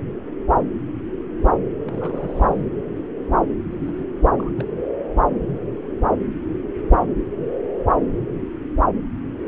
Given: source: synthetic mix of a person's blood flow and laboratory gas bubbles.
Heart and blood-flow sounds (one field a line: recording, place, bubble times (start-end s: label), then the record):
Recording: Doppler ultrasound of blood flow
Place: subclavian vein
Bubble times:
1.84-2.65 s: bubbles
3.70-4.04 s: bubbles
4.38-4.51 s: bubbles
4.57-4.71 s: bubbles
From the record:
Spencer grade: 2 (many but less than half of the cardiac periods contain bubble signals, singularly or in groups)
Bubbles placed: anywhere in the cardiac cycle